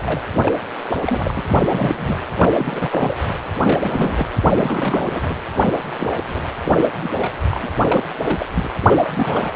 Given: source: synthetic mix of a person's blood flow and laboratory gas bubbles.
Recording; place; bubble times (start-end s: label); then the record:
Doppler ultrasound of blood flow; precordium
0.05-0.22 s: bubbles
0.35-0.53 s: bubbles
0.90-0.96 s: bubbles
1.06-1.42 s: bubbles
1.62-2.24 s: bubbles
2.36-2.51 s: bubbles
2.56-3.17 s: bubbles
3.62-4.26 s: bubbles
4.38-5.34 s: bubbles
5.98-6.10 s: bubbles
6.27-6.49 s: bubbles
6.65-6.75 s: bubbles
6.81-6.90 s: bubbles
7.03-7.14 s: bubbles
7.21-7.32 s: bubbles
7.43-7.74 s: bubbles
7.81-8.05 s: bubbles
8.21-8.46 s: bubbles
8.54-8.68 s: bubbles
8.81-9.53 s: bubbles
From the record:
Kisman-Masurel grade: 342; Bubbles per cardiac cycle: rolling drumbeat, 9 or more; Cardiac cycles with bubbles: 100%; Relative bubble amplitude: moderate (0.250 to 0.450); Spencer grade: 3 (all of the cardiac periods contain showers or single bubble signals, but not dominating or overriding the cardiac motion signals); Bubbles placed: anywhere in the cardiac cycle